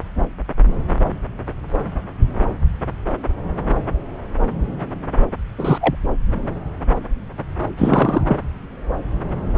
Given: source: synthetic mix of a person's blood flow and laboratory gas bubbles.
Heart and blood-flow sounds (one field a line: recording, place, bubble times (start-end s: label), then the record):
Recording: Doppler ultrasound of blood flow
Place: subclavian vein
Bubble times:
5.58-5.78 s: bubbles
5.80-5.96 s: bubbles
7.77-8.38 s: bubbles
From the record:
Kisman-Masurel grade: 223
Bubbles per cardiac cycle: several, 3 to 8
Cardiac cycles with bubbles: 10 to 50%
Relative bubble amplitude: loud (0.450 to 0.775)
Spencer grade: 2 (many but less than half of the cardiac periods contain bubble signals, singularly or in groups)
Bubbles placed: anywhere in the cardiac cycle